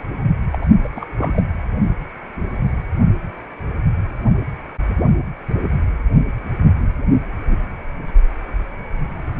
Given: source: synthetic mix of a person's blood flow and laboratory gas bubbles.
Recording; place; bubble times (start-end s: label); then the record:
Doppler ultrasound of blood flow; precordium
0.51-0.58 s: bubbles
0.62-0.66 s: bubbles
0.84-0.88 s: bubbles
0.95-1.06 s: bubbles
1.17-1.42 s: bubbles
From the record:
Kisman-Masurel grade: 212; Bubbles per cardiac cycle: several, 3 to 8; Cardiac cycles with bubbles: 1 to 10%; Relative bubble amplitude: moderate (0.250 to 0.450); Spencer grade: 1 (occasional bubble signal discernible with the cardiac motion signal, with majority of cardiac periods free of bubbles); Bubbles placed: anywhere in the cardiac cycle